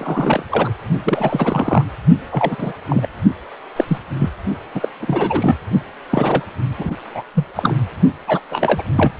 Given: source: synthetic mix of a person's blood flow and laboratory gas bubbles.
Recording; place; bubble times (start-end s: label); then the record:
Doppler ultrasound of blood flow; precordium
0.00-0.44 s: bubbles
0.50-0.71 s: bubbles
1.04-1.84 s: bubbles
2.31-2.72 s: bubbles
2.88-3.07 s: bubbles
3.25-3.31 s: bubbles
3.76-3.85 s: bubbles
3.87-3.98 s: bubbles
4.19-4.30 s: bubbles
4.75-4.89 s: bubbles
5.00-5.57 s: bubbles
6.10-6.43 s: bubbles
6.78-6.96 s: bubbles
7.15-7.23 s: bubbles
7.33-7.45 s: bubbles
7.55-7.75 s: bubbles
8.26-8.40 s: bubbles
8.51-8.83 s: bubbles
8.95-9.11 s: bubbles
From the record:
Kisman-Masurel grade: 343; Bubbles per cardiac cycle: rolling drumbeat, 9 or more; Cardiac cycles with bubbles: 100%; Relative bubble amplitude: loud (0.450 to 0.775); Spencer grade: 3 (all of the cardiac periods contain showers or single bubble signals, but not dominating or overriding the cardiac motion signals); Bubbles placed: only in the low amplitude regions of the cardiac cycle